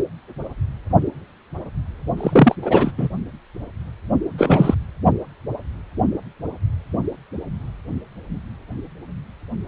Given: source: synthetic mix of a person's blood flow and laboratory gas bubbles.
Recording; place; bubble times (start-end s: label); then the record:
Doppler ultrasound of blood flow; precordium
2.17-2.56 s: bubbles
2.61-2.92 s: bubbles
2.97-3.08 s: bubbles
4.38-4.75 s: bubbles
From the record:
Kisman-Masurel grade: 223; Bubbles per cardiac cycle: several, 3 to 8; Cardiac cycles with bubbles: 10 to 50%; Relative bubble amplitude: loud (0.450 to 0.775); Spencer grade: 2 (many but less than half of the cardiac periods contain bubble signals, singularly or in groups); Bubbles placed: only in the low amplitude regions of the cardiac cycle